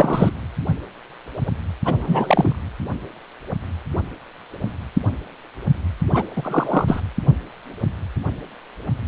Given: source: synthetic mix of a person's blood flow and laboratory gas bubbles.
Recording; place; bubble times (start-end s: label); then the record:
Doppler ultrasound of blood flow; precordium
0.00-0.30 s: bubbles
1.85-2.56 s: bubbles
6.13-6.24 s: bubbles
6.35-7.03 s: bubbles
From the record:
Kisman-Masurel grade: 223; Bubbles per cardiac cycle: several, 3 to 8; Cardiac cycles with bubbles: 10 to 50%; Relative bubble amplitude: loud (0.450 to 0.775); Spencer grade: 2 (many but less than half of the cardiac periods contain bubble signals, singularly or in groups); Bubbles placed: anywhere in the cardiac cycle